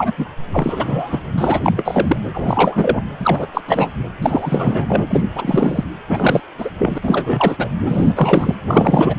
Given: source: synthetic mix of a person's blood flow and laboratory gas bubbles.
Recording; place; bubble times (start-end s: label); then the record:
Doppler ultrasound of blood flow; precordium
0.00-0.12 s: bubbles
0.17-0.26 s: bubbles
0.52-1.22 s: bubbles
1.38-1.60 s: bubbles
1.65-2.17 s: bubbles
2.33-3.04 s: bubbles
3.20-3.47 s: bubbles
3.54-3.61 s: bubbles
3.67-3.91 s: bubbles
4.22-5.05 s: bubbles
5.10-5.23 s: bubbles
5.35-5.84 s: bubbles
6.08-6.40 s: bubbles
6.58-6.70 s: bubbles
6.79-6.98 s: bubbles
7.03-7.69 s: bubbles
7.85-8.54 s: bubbles
8.67-9.16 s: bubbles
From the record:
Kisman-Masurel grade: 343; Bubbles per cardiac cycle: rolling drumbeat, 9 or more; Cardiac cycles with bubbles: 100%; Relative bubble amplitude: loud (0.450 to 0.775); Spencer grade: 3 (all of the cardiac periods contain showers or single bubble signals, but not dominating or overriding the cardiac motion signals); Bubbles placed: anywhere in the cardiac cycle